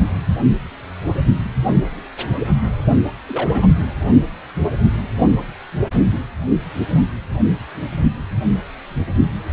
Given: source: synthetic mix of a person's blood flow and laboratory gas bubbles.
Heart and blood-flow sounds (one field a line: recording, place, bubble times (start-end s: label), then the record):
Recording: Doppler ultrasound of blood flow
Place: precordium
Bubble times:
3.27-3.67 s: bubbles
From the record:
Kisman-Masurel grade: 112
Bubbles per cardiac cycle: 1 to 2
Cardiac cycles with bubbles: 1 to 10%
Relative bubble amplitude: moderate (0.250 to 0.450)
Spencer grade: 1 (occasional bubble signal discernible with the cardiac motion signal, with majority of cardiac periods free of bubbles)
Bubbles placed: only in the low amplitude regions of the cardiac cycle